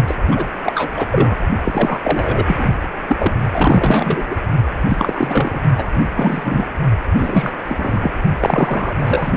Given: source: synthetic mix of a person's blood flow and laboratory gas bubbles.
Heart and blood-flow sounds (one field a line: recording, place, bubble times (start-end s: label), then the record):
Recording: Doppler ultrasound of blood flow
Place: precordium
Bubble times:
0.07-0.15 s: bubbles
0.31-0.46 s: bubbles
0.64-0.92 s: bubbles
0.97-1.05 s: bubbles
1.11-1.38 s: bubbles
1.64-2.44 s: bubbles
2.47-2.69 s: bubbles
3.08-3.33 s: bubbles
3.53-4.25 s: bubbles
4.29-4.36 s: bubbles
4.88-5.60 s: bubbles
5.77-5.85 s: bubbles
5.94-6.02 s: bubbles
6.15-6.68 s: bubbles
7.17-7.52 s: bubbles
7.64-8.12 s: bubbles
8.40-9.31 s: bubbles
From the record:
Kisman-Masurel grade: 343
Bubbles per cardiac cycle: rolling drumbeat, 9 or more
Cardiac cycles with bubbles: 100%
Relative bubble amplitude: loud (0.450 to 0.775)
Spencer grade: 3 (all of the cardiac periods contain showers or single bubble signals, but not dominating or overriding the cardiac motion signals)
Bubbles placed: only in the low amplitude regions of the cardiac cycle